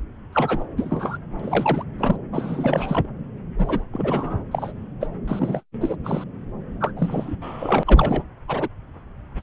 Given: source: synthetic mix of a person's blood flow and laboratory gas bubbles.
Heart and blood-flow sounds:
Doppler ultrasound of blood flow; subclavian vein
0.32-0.66 s: bubbles
0.77-1.18 s: bubbles
1.40-1.83 s: bubbles
1.98-2.17 s: bubbles
2.31-3.06 s: bubbles
3.57-3.84 s: bubbles
3.92-4.44 s: bubbles
4.51-4.73 s: bubbles
5.00-5.07 s: bubbles
5.27-5.62 s: bubbles
5.80-5.96 s: bubbles
6.04-6.24 s: bubbles
6.80-6.92 s: bubbles
6.96-7.36 s: bubbles
7.42-7.83 s: bubbles
7.86-8.23 s: bubbles
8.48-8.68 s: bubbles
9.39-9.43 s: bubbles
From the record:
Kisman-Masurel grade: 343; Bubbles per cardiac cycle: rolling drumbeat, 9 or more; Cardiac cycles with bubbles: 100%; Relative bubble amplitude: loud (0.450 to 0.775); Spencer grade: 3 (all of the cardiac periods contain showers or single bubble signals, but not dominating or overriding the cardiac motion signals); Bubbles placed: anywhere in the cardiac cycle

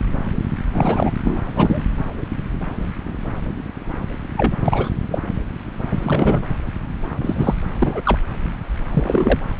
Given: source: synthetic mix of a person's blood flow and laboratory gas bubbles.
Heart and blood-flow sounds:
Doppler ultrasound of blood flow; subclavian vein
0.72-1.11 s: bubbles
1.24-1.42 s: bubbles
1.56-1.84 s: bubbles
4.36-4.52 s: bubbles
4.61-4.89 s: bubbles
5.11-5.18 s: bubbles
5.91-6.42 s: bubbles
7.21-7.54 s: bubbles
7.81-8.01 s: bubbles
8.05-8.20 s: bubbles
8.94-9.44 s: bubbles
From the record:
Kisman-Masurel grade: 223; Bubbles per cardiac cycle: several, 3 to 8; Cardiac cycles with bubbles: 10 to 50%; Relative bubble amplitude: loud (0.450 to 0.775); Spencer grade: 2 (many but less than half of the cardiac periods contain bubble signals, singularly or in groups); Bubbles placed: anywhere in the cardiac cycle

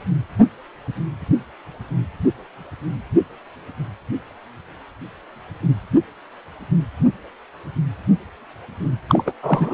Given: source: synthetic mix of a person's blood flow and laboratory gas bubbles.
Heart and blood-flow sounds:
Doppler ultrasound of blood flow; precordium
9.08-9.23 s: bubbles
9.26-9.32 s: bubbles
9.42-9.74 s: bubbles
From the record:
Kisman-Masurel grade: 213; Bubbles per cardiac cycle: several, 3 to 8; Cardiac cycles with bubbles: 1 to 10%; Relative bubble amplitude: loud (0.450 to 0.775); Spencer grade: 1 (occasional bubble signal discernible with the cardiac motion signal, with majority of cardiac periods free of bubbles); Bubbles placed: anywhere in the cardiac cycle

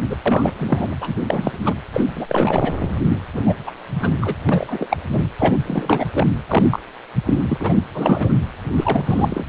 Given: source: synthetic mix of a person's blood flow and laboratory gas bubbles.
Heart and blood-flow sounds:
Doppler ultrasound of blood flow; precordium
0.09-0.16 s: bubbles
0.26-0.96 s: bubbles
1.00-1.16 s: bubbles
1.26-1.52 s: bubbles
1.65-1.74 s: bubbles
1.94-2.75 s: bubbles
3.08-3.17 s: bubbles
3.33-3.41 s: bubbles
3.46-3.55 s: bubbles
3.67-3.71 s: bubbles
3.99-4.13 s: bubbles
4.21-4.35 s: bubbles
4.49-4.87 s: bubbles
4.90-4.97 s: bubbles
5.12-5.26 s: bubbles
5.38-5.57 s: bubbles
5.66-6.07 s: bubbles
6.14-6.27 s: bubbles
6.48-6.79 s: bubbles
7.26-7.44 s: bubbles
7.48-7.79 s: bubbles
7.94-8.36 s: bubbles
8.77-9.45 s: bubbles
From the record:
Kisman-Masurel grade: 342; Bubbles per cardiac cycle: rolling drumbeat, 9 or more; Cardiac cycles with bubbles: 100%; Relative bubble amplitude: moderate (0.250 to 0.450); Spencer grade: 3 (all of the cardiac periods contain showers or single bubble signals, but not dominating or overriding the cardiac motion signals); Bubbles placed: anywhere in the cardiac cycle

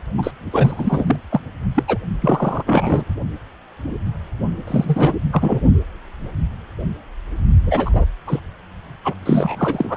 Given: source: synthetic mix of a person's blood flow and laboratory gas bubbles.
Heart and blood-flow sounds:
Doppler ultrasound of blood flow; precordium
0.17-0.31 s: bubbles
0.51-1.16 s: bubbles
1.30-1.40 s: bubbles
1.74-1.83 s: bubbles
1.88-1.98 s: bubbles
2.21-3.04 s: bubbles
4.67-5.13 s: bubbles
5.32-5.61 s: bubbles
7.62-8.05 s: bubbles
8.27-8.39 s: bubbles
9.04-9.14 s: bubbles
9.26-9.97 s: bubbles
From the record:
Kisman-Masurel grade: 333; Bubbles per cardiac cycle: rolling drumbeat, 9 or more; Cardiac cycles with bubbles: 50 to 99%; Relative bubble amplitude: loud (0.450 to 0.775); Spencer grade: 3 (all of the cardiac periods contain showers or single bubble signals, but not dominating or overriding the cardiac motion signals); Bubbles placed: only in the low amplitude regions of the cardiac cycle

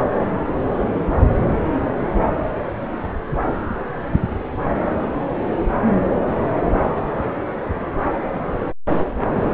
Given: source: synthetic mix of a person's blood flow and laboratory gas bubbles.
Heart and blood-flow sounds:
Doppler ultrasound of blood flow; subclavian vein
no bubbles
From the record:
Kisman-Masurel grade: 000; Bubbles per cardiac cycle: 0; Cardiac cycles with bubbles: 0%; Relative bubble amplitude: no bubbles discernible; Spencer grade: 0 (complete lack of bubble signals)

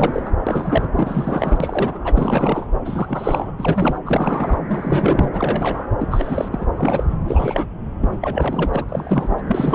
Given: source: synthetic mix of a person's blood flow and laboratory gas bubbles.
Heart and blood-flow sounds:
Doppler ultrasound of blood flow; subclavian vein
0.00-0.30 s: bubbles
0.46-0.89 s: bubbles
0.95-1.98 s: bubbles
2.04-2.67 s: bubbles
2.84-3.52 s: bubbles
3.59-3.99 s: bubbles
4.05-4.59 s: bubbles
4.68-5.29 s: bubbles
5.33-5.86 s: bubbles
5.99-6.49 s: bubbles
6.51-6.70 s: bubbles
6.76-7.17 s: bubbles
7.25-7.66 s: bubbles
7.99-8.19 s: bubbles
8.22-8.70 s: bubbles
8.73-8.85 s: bubbles
8.89-9.35 s: bubbles
9.38-9.42 s: bubbles
9.47-9.75 s: bubbles
From the record:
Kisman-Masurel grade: 342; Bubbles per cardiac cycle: rolling drumbeat, 9 or more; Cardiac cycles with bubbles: 100%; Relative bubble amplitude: moderate (0.250 to 0.450); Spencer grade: 3 (all of the cardiac periods contain showers or single bubble signals, but not dominating or overriding the cardiac motion signals); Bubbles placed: anywhere in the cardiac cycle

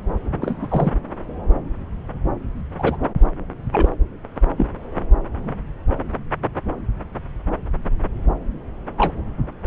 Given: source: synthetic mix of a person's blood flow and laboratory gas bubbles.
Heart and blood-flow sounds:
Doppler ultrasound of blood flow; subclavian vein
0.42-0.91 s: bubbles
2.78-2.97 s: bubbles
3.73-3.89 s: bubbles
4.57-4.67 s: bubbles
8.98-9.13 s: bubbles
From the record:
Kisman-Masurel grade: 122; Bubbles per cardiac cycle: 1 to 2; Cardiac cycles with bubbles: 10 to 50%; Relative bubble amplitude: moderate (0.250 to 0.450); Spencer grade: 2 (many but less than half of the cardiac periods contain bubble signals, singularly or in groups); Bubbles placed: anywhere in the cardiac cycle

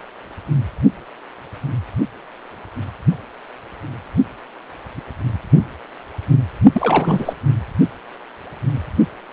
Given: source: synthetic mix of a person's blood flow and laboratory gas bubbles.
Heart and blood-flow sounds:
Doppler ultrasound of blood flow; precordium
6.72-7.33 s: bubbles
From the record:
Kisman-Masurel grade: 222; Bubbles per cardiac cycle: several, 3 to 8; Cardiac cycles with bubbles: 10 to 50%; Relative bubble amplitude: moderate (0.250 to 0.450); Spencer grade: 2 (many but less than half of the cardiac periods contain bubble signals, singularly or in groups); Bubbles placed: only in the low amplitude regions of the cardiac cycle

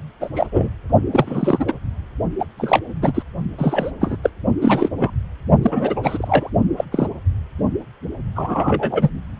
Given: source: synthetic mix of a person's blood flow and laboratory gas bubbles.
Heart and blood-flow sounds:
Doppler ultrasound of blood flow; precordium
0.21-0.29 s: bubbles
0.35-0.47 s: bubbles
0.51-0.69 s: bubbles
1.11-1.65 s: bubbles
1.68-1.74 s: bubbles
2.40-2.45 s: bubbles
2.57-2.80 s: bubbles
3.01-3.22 s: bubbles
3.58-3.91 s: bubbles
4.00-4.17 s: bubbles
4.22-4.30 s: bubbles
4.62-4.89 s: bubbles
4.98-5.11 s: bubbles
5.62-6.50 s: bubbles
6.76-6.84 s: bubbles
6.91-7.07 s: bubbles
8.36-9.10 s: bubbles
From the record:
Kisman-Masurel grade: 243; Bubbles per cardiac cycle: several, 3 to 8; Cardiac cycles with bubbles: 100%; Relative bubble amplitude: loud (0.450 to 0.775); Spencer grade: 3 (all of the cardiac periods contain showers or single bubble signals, but not dominating or overriding the cardiac motion signals); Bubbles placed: only in the low amplitude regions of the cardiac cycle

